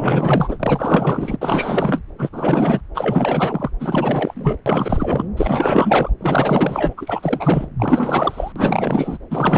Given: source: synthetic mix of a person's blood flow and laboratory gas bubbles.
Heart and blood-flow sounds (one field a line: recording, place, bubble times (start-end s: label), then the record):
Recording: Doppler ultrasound of blood flow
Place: subclavian vein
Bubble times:
0.00-1.36 s: bubbles
1.41-2.02 s: bubbles
2.18-2.29 s: bubbles
2.32-2.81 s: bubbles
2.95-3.70 s: bubbles
3.80-4.56 s: bubbles
4.66-5.27 s: bubbles
5.37-6.11 s: bubbles
6.21-6.94 s: bubbles
6.97-7.69 s: bubbles
7.79-8.53 s: bubbles
8.55-9.18 s: bubbles
9.30-9.58 s: bubbles
From the record:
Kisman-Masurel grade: 444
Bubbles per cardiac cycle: continuous sound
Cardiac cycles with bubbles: 100%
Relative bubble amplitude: maximal (0.775 to 0.999)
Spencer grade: 4 (maximum detectable bubble signal sounding continuously throughout systole and diastole of every cardiac period, and overriding the amplitude of the normal cardiac signals)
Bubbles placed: anywhere in the cardiac cycle